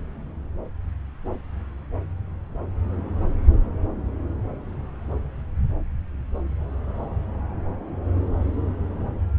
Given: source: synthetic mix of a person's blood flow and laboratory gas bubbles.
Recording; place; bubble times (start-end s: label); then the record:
Doppler ultrasound of blood flow; subclavian vein
no bubbles
From the record:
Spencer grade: 0 (complete lack of bubble signals)